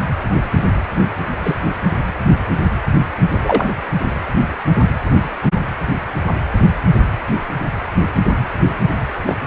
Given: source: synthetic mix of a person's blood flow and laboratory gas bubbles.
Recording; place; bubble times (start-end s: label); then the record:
Doppler ultrasound of blood flow; precordium
1.43-1.58 s: bubbles
3.29-3.69 s: bubbles
9.27-9.36 s: bubbles
From the record:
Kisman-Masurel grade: 123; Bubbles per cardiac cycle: 1 to 2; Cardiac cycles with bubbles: 10 to 50%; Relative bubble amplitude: loud (0.450 to 0.775); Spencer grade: 2 (many but less than half of the cardiac periods contain bubble signals, singularly or in groups); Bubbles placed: anywhere in the cardiac cycle